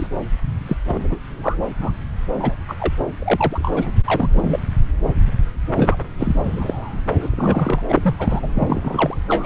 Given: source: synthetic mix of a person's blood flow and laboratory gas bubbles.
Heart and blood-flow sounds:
Doppler ultrasound of blood flow; subclavian vein
0.00-0.07 s: bubbles
0.66-0.77 s: bubbles
0.88-1.19 s: bubbles
1.43-1.55 s: bubbles
1.81-1.92 s: bubbles
2.39-2.55 s: bubbles
2.68-2.76 s: bubbles
2.79-2.94 s: bubbles
3.19-3.92 s: bubbles
4.06-4.59 s: bubbles
5.75-5.96 s: bubbles
6.17-6.35 s: bubbles
6.43-7.01 s: bubbles
7.20-7.81 s: bubbles
7.88-8.15 s: bubbles
8.19-8.46 s: bubbles
8.54-9.15 s: bubbles
9.29-9.45 s: bubbles
From the record:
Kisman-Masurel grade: 232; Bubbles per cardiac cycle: several, 3 to 8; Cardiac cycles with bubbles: 50 to 99%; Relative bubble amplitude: moderate (0.250 to 0.450); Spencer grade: 3 (all of the cardiac periods contain showers or single bubble signals, but not dominating or overriding the cardiac motion signals); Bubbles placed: anywhere in the cardiac cycle

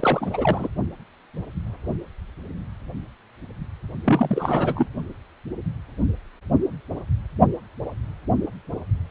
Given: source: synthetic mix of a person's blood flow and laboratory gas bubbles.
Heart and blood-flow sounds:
Doppler ultrasound of blood flow; precordium
0.00-0.68 s: bubbles
4.04-4.88 s: bubbles
From the record:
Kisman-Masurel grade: 222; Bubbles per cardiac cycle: several, 3 to 8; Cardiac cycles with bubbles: 10 to 50%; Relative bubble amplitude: moderate (0.250 to 0.450); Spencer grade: 2 (many but less than half of the cardiac periods contain bubble signals, singularly or in groups); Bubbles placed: only in the low amplitude regions of the cardiac cycle

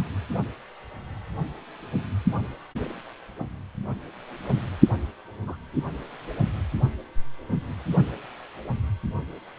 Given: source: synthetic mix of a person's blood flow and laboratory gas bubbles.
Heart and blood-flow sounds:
Doppler ultrasound of blood flow; precordium
5.46-5.57 s: bubbles
From the record:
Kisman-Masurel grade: 111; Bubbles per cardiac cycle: 1 to 2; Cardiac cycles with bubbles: 1 to 10%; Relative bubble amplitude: barely perceptible (0.100 to 0.250); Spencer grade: 1 (occasional bubble signal discernible with the cardiac motion signal, with majority of cardiac periods free of bubbles); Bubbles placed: anywhere in the cardiac cycle

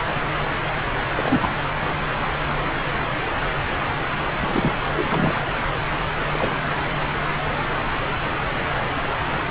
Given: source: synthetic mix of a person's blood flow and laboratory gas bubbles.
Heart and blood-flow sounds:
Doppler ultrasound of blood flow; subclavian vein
1.17-1.49 s: bubbles
4.41-4.77 s: bubbles
4.96-5.34 s: bubbles
6.28-6.54 s: bubbles
From the record:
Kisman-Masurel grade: 221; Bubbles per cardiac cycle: several, 3 to 8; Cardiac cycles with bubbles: 10 to 50%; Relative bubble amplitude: barely perceptible (0.100 to 0.250); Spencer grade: 2 (many but less than half of the cardiac periods contain bubble signals, singularly or in groups); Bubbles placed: anywhere in the cardiac cycle

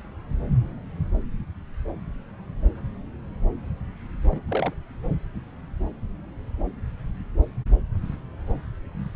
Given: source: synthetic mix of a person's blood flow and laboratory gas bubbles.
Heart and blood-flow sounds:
Doppler ultrasound of blood flow; subclavian vein
4.28-4.42 s: bubbles
4.49-4.74 s: bubbles
From the record:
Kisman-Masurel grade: 211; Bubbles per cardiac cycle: several, 3 to 8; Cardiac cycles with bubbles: 1 to 10%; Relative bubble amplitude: barely perceptible (0.100 to 0.250); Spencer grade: 1 (occasional bubble signal discernible with the cardiac motion signal, with majority of cardiac periods free of bubbles); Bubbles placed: anywhere in the cardiac cycle

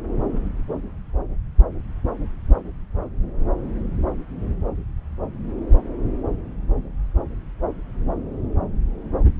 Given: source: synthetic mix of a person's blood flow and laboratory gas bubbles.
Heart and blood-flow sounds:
Doppler ultrasound of blood flow; subclavian vein
no bubbles
From the record:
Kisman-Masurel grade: 000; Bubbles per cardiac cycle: 0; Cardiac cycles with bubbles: 0%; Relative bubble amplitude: no bubbles discernible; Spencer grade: 0 (complete lack of bubble signals)

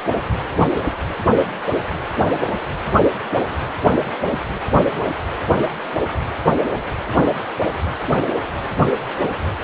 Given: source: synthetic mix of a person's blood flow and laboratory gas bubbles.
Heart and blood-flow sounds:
Doppler ultrasound of blood flow; precordium
no bubbles
From the record:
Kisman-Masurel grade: 000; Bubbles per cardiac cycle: 0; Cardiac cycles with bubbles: 0%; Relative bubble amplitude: no bubbles discernible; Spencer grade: 0 (complete lack of bubble signals)

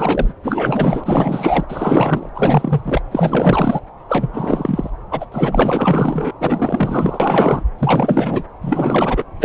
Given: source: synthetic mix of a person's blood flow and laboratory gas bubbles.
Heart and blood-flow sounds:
Doppler ultrasound of blood flow; subclavian vein
0.00-0.33 s: bubbles
0.43-1.65 s: bubbles
1.68-2.30 s: bubbles
2.35-2.81 s: bubbles
2.84-3.01 s: bubbles
3.11-3.80 s: bubbles
4.08-4.90 s: bubbles
5.11-5.25 s: bubbles
5.32-6.32 s: bubbles
6.40-7.63 s: bubbles
7.78-8.43 s: bubbles
8.61-9.24 s: bubbles
9.40-9.45 s: bubbles
From the record:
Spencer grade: 4 (maximum detectable bubble signal sounding continuously throughout systole and diastole of every cardiac period, and overriding the amplitude of the normal cardiac signals); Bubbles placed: anywhere in the cardiac cycle

